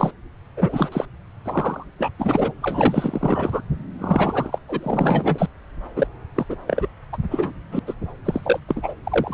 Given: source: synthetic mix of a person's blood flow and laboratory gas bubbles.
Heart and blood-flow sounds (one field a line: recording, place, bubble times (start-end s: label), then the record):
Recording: Doppler ultrasound of blood flow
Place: subclavian vein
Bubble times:
0.00-0.11 s: bubbles
0.57-0.89 s: bubbles
0.91-1.05 s: bubbles
1.44-1.86 s: bubbles
1.99-2.10 s: bubbles
2.19-2.52 s: bubbles
2.62-3.62 s: bubbles
3.99-4.58 s: bubbles
4.68-5.48 s: bubbles
5.96-6.07 s: bubbles
6.34-6.45 s: bubbles
6.49-6.57 s: bubbles
6.67-6.88 s: bubbles
7.12-7.17 s: bubbles
7.30-7.52 s: bubbles
7.71-7.79 s: bubbles
7.87-7.94 s: bubbles
8.25-8.60 s: bubbles
8.68-8.94 s: bubbles
9.04-9.34 s: bubbles
From the record:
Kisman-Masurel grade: 343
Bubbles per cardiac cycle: rolling drumbeat, 9 or more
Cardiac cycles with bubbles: 100%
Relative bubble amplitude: loud (0.450 to 0.775)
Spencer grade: 3 (all of the cardiac periods contain showers or single bubble signals, but not dominating or overriding the cardiac motion signals)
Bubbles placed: anywhere in the cardiac cycle